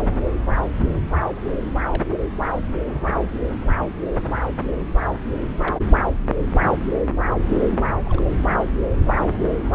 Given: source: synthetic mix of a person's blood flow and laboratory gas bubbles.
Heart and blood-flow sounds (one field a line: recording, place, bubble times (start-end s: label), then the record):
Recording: Doppler ultrasound of blood flow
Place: subclavian vein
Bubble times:
1.88-2.02 s: bubbles
2.89-3.25 s: bubbles
5.62-5.77 s: bubbles
5.88-6.02 s: bubbles
8.05-8.22 s: bubbles
From the record:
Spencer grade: 2 (many but less than half of the cardiac periods contain bubble signals, singularly or in groups)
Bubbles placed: anywhere in the cardiac cycle